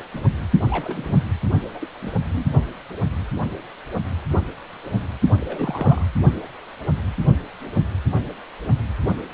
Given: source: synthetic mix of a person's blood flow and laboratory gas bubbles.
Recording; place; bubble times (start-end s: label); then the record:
Doppler ultrasound of blood flow; precordium
0.00-0.02 s: bubbles
0.13-0.25 s: bubbles
0.69-1.16 s: bubbles
1.69-1.89 s: bubbles
2.01-2.11 s: bubbles
2.32-2.46 s: bubbles
5.40-6.06 s: bubbles
From the record:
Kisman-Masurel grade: 221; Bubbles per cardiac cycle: several, 3 to 8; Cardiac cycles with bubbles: 10 to 50%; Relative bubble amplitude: barely perceptible (0.100 to 0.250); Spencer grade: 2 (many but less than half of the cardiac periods contain bubble signals, singularly or in groups); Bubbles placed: only in the low amplitude regions of the cardiac cycle